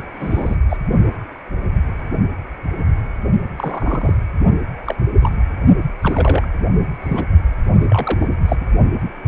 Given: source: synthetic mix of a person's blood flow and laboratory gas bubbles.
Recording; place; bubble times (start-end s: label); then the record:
Doppler ultrasound of blood flow; precordium
0.00-0.04 s: bubbles
0.20-0.56 s: bubbles
0.69-0.78 s: bubbles
3.58-4.13 s: bubbles
4.84-4.96 s: bubbles
5.21-5.36 s: bubbles
6.01-6.48 s: bubbles
7.02-7.25 s: bubbles
7.73-8.27 s: bubbles
8.46-8.56 s: bubbles
8.61-8.66 s: bubbles
From the record:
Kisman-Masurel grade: 232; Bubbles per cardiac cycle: several, 3 to 8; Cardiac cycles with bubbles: 50 to 99%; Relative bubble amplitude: moderate (0.250 to 0.450); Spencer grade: 3 (all of the cardiac periods contain showers or single bubble signals, but not dominating or overriding the cardiac motion signals); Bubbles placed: only in the low amplitude regions of the cardiac cycle